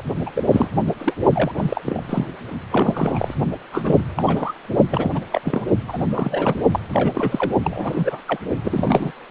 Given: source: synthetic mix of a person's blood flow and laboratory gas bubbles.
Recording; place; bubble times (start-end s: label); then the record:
Doppler ultrasound of blood flow; precordium
0.26-0.30 s: bubbles
0.35-0.43 s: bubbles
0.51-0.70 s: bubbles
1.00-1.15 s: bubbles
1.33-1.52 s: bubbles
1.56-1.82 s: bubbles
1.86-2.01 s: bubbles
2.07-2.26 s: bubbles
2.70-3.34 s: bubbles
3.72-3.98 s: bubbles
4.16-4.23 s: bubbles
4.26-4.53 s: bubbles
4.90-5.12 s: bubbles
5.14-5.22 s: bubbles
5.32-5.41 s: bubbles
5.44-5.65 s: bubbles
5.88-6.60 s: bubbles
6.71-6.79 s: bubbles
6.92-7.51 s: bubbles
7.64-8.19 s: bubbles
8.28-8.39 s: bubbles
8.64-9.12 s: bubbles
From the record:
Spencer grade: 3 (all of the cardiac periods contain showers or single bubble signals, but not dominating or overriding the cardiac motion signals); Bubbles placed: only in the low amplitude regions of the cardiac cycle